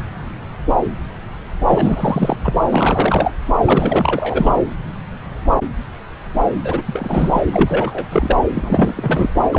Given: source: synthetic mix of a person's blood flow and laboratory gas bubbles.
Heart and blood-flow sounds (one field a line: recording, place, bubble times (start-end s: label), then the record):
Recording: Doppler ultrasound of blood flow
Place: subclavian vein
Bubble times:
1.68-2.36 s: bubbles
2.44-2.54 s: bubbles
2.72-3.33 s: bubbles
3.65-4.56 s: bubbles
6.64-6.83 s: bubbles
6.87-7.42 s: bubbles
7.52-8.05 s: bubbles
8.11-8.40 s: bubbles
8.54-9.29 s: bubbles
9.51-9.59 s: bubbles
From the record:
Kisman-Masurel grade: 333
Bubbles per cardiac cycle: rolling drumbeat, 9 or more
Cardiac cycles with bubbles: 50 to 99%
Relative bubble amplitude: loud (0.450 to 0.775)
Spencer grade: 3 (all of the cardiac periods contain showers or single bubble signals, but not dominating or overriding the cardiac motion signals)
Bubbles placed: anywhere in the cardiac cycle